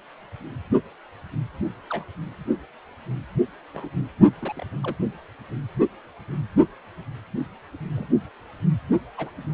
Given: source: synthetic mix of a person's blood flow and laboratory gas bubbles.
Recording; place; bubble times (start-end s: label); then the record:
Doppler ultrasound of blood flow; precordium
1.90-2.04 s: bubbles
3.74-3.89 s: bubbles
4.42-4.53 s: bubbles
4.56-4.64 s: bubbles
4.83-4.96 s: bubbles
7.96-8.06 s: bubbles
9.17-9.30 s: bubbles
From the record:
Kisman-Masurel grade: 121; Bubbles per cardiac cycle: 1 to 2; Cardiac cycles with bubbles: 10 to 50%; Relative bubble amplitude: barely perceptible (0.100 to 0.250); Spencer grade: 2 (many but less than half of the cardiac periods contain bubble signals, singularly or in groups); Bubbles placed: only in the low amplitude regions of the cardiac cycle